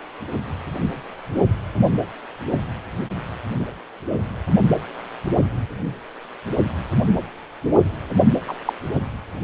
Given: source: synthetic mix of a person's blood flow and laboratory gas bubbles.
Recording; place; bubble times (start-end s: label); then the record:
Doppler ultrasound of blood flow; precordium
8.47-8.55 s: bubbles
8.65-8.73 s: bubbles
From the record:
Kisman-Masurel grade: 112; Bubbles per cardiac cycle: 1 to 2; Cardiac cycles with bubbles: 1 to 10%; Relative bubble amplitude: moderate (0.250 to 0.450); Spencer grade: 1 (occasional bubble signal discernible with the cardiac motion signal, with majority of cardiac periods free of bubbles); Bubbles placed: only in the low amplitude regions of the cardiac cycle